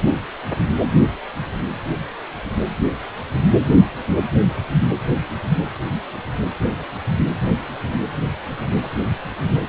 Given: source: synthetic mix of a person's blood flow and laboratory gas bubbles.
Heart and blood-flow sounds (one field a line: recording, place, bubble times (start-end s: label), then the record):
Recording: Doppler ultrasound of blood flow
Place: precordium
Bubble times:
no bubbles
From the record:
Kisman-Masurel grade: 000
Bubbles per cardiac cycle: 0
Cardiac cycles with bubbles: 0%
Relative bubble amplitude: no bubbles discernible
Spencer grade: 0 (complete lack of bubble signals)